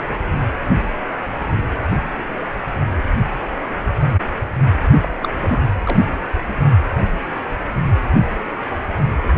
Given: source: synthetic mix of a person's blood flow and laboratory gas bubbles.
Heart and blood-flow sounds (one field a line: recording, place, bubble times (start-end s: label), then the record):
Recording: Doppler ultrasound of blood flow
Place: precordium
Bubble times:
5.02-5.68 s: bubbles
5.83-6.04 s: bubbles
From the record:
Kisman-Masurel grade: 212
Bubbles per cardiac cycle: several, 3 to 8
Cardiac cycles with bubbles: 1 to 10%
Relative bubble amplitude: moderate (0.250 to 0.450)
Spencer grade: 1 (occasional bubble signal discernible with the cardiac motion signal, with majority of cardiac periods free of bubbles)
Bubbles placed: only in the low amplitude regions of the cardiac cycle